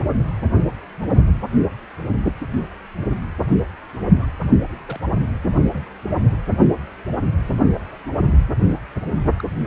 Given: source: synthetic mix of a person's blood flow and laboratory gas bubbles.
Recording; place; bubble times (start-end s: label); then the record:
Doppler ultrasound of blood flow; precordium
4.17-4.25 s: bubbles
4.86-4.98 s: bubbles
5.73-5.89 s: bubbles
9.38-9.43 s: bubbles
From the record:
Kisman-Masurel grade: 121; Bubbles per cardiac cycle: 1 to 2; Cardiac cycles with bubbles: 10 to 50%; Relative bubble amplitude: barely perceptible (0.100 to 0.250); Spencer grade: 2 (many but less than half of the cardiac periods contain bubble signals, singularly or in groups); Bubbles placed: only in the low amplitude regions of the cardiac cycle